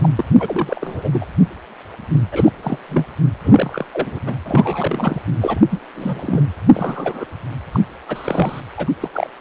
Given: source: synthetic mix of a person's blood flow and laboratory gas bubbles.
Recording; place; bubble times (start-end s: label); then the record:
Doppler ultrasound of blood flow; precordium
0.00-0.09 s: bubbles
0.16-0.25 s: bubbles
0.33-1.25 s: bubbles
2.31-2.52 s: bubbles
2.62-2.79 s: bubbles
2.89-3.04 s: bubbles
3.44-3.86 s: bubbles
3.92-4.19 s: bubbles
4.25-4.36 s: bubbles
4.45-5.21 s: bubbles
5.41-5.60 s: bubbles
5.71-5.80 s: bubbles
5.96-6.45 s: bubbles
6.74-7.25 s: bubbles
7.72-7.80 s: bubbles
8.09-8.61 s: bubbles
8.77-8.90 s: bubbles
9.00-9.10 s: bubbles
9.12-9.30 s: bubbles
From the record:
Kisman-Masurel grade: 232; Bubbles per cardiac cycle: several, 3 to 8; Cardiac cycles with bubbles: 50 to 99%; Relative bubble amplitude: moderate (0.250 to 0.450); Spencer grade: 3 (all of the cardiac periods contain showers or single bubble signals, but not dominating or overriding the cardiac motion signals); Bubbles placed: anywhere in the cardiac cycle